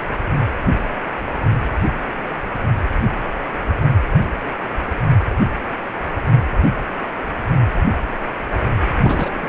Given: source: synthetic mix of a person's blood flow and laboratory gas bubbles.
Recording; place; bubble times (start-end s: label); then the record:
Doppler ultrasound of blood flow; precordium
9.03-9.48 s: bubbles
From the record:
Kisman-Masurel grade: 222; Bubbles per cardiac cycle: several, 3 to 8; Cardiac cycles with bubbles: 10 to 50%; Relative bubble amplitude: moderate (0.250 to 0.450); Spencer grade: 2 (many but less than half of the cardiac periods contain bubble signals, singularly or in groups); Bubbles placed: anywhere in the cardiac cycle